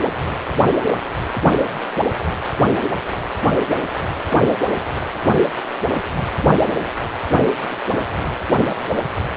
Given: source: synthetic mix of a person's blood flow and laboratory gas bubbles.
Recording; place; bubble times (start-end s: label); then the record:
Doppler ultrasound of blood flow; precordium
no bubbles
From the record:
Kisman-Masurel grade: 000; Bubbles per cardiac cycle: 0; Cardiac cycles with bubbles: 0%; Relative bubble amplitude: no bubbles discernible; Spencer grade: 0 (complete lack of bubble signals)